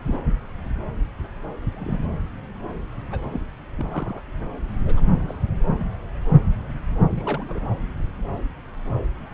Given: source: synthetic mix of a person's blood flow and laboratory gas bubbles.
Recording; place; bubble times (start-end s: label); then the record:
Doppler ultrasound of blood flow; subclavian vein
0.03-0.17 s: bubbles
1.61-2.08 s: bubbles
3.10-3.25 s: bubbles
3.33-3.40 s: bubbles
3.76-4.22 s: bubbles
4.85-5.00 s: bubbles
5.28-5.37 s: bubbles
5.79-5.86 s: bubbles
7.16-7.60 s: bubbles
From the record:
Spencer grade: 2 (many but less than half of the cardiac periods contain bubble signals, singularly or in groups); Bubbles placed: anywhere in the cardiac cycle